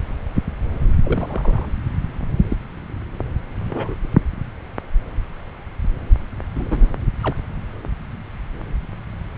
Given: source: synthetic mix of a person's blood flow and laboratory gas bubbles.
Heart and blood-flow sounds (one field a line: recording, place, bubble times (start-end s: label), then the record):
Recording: Doppler ultrasound of blood flow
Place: subclavian vein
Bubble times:
1.03-1.66 s: bubbles
2.50-2.56 s: bubbles
3.66-3.95 s: bubbles
6.54-6.87 s: bubbles
7.21-7.36 s: bubbles
From the record:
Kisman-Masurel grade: 121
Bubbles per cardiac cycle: 1 to 2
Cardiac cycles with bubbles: 10 to 50%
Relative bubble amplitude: barely perceptible (0.100 to 0.250)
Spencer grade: 2 (many but less than half of the cardiac periods contain bubble signals, singularly or in groups)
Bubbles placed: anywhere in the cardiac cycle